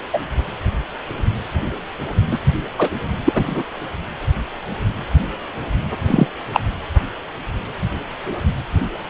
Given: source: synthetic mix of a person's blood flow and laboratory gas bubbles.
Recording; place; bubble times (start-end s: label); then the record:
Doppler ultrasound of blood flow; precordium
0.13-0.19 s: bubbles
2.31-2.39 s: bubbles
2.79-2.89 s: bubbles
3.25-3.63 s: bubbles
6.07-6.28 s: bubbles
6.53-6.60 s: bubbles
From the record:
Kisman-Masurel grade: 123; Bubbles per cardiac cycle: 1 to 2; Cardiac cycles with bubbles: 10 to 50%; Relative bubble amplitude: loud (0.450 to 0.775); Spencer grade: 2 (many but less than half of the cardiac periods contain bubble signals, singularly or in groups); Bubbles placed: anywhere in the cardiac cycle